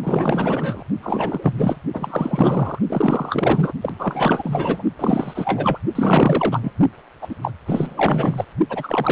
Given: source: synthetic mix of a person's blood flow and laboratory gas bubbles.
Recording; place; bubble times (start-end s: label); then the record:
Doppler ultrasound of blood flow; precordium
0.03-0.83 s: bubbles
1.03-1.77 s: bubbles
1.93-2.79 s: bubbles
2.86-3.73 s: bubbles
3.81-3.93 s: bubbles
3.98-4.83 s: bubbles
4.99-5.79 s: bubbles
5.95-6.73 s: bubbles
7.21-7.35 s: bubbles
7.42-7.51 s: bubbles
7.66-8.45 s: bubbles
8.69-9.12 s: bubbles
From the record:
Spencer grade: 4 (maximum detectable bubble signal sounding continuously throughout systole and diastole of every cardiac period, and overriding the amplitude of the normal cardiac signals); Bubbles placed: only in the low amplitude regions of the cardiac cycle